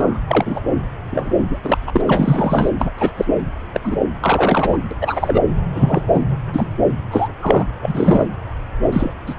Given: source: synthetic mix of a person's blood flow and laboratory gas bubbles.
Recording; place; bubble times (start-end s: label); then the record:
Doppler ultrasound of blood flow; subclavian vein
0.00-0.19 s: bubbles
0.28-0.61 s: bubbles
1.10-1.37 s: bubbles
1.50-1.58 s: bubbles
1.64-1.78 s: bubbles
1.86-2.02 s: bubbles
2.07-2.70 s: bubbles
2.79-2.90 s: bubbles
2.98-3.10 s: bubbles
3.17-3.25 s: bubbles
3.74-3.80 s: bubbles
3.83-3.97 s: bubbles
4.21-4.78 s: bubbles
4.91-4.95 s: bubbles
5.00-5.41 s: bubbles
5.74-6.02 s: bubbles
6.14-6.25 s: bubbles
6.53-6.67 s: bubbles
7.11-7.28 s: bubbles
7.42-7.65 s: bubbles
7.82-8.29 s: bubbles
8.92-9.13 s: bubbles
9.26-9.34 s: bubbles
From the record:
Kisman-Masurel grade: 233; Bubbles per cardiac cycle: several, 3 to 8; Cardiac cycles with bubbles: 50 to 99%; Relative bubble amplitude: loud (0.450 to 0.775); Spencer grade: 3 (all of the cardiac periods contain showers or single bubble signals, but not dominating or overriding the cardiac motion signals); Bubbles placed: anywhere in the cardiac cycle